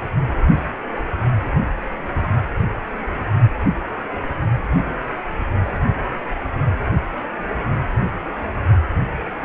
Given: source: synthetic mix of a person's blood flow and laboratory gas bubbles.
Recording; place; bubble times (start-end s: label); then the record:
Doppler ultrasound of blood flow; precordium
no bubbles
From the record:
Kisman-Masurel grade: 000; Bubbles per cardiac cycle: 0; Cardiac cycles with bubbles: 0%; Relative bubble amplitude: no bubbles discernible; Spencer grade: 0 (complete lack of bubble signals)